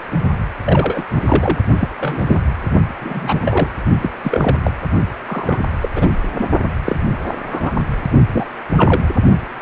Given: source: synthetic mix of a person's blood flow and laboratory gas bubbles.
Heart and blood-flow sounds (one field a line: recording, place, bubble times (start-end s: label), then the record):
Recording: Doppler ultrasound of blood flow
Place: precordium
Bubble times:
0.65-1.03 s: bubbles
1.16-1.58 s: bubbles
1.80-1.90 s: bubbles
2.01-2.38 s: bubbles
3.00-3.68 s: bubbles
4.02-4.11 s: bubbles
4.23-4.56 s: bubbles
4.63-4.72 s: bubbles
5.27-5.60 s: bubbles
5.81-5.90 s: bubbles
5.96-6.08 s: bubbles
6.38-6.47 s: bubbles
6.84-6.96 s: bubbles
7.25-7.34 s: bubbles
7.46-7.71 s: bubbles
8.32-8.47 s: bubbles
8.77-9.01 s: bubbles
From the record:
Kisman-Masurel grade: 232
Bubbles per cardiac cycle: several, 3 to 8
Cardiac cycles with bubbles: 50 to 99%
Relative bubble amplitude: moderate (0.250 to 0.450)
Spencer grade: 3 (all of the cardiac periods contain showers or single bubble signals, but not dominating or overriding the cardiac motion signals)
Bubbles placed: only in the low amplitude regions of the cardiac cycle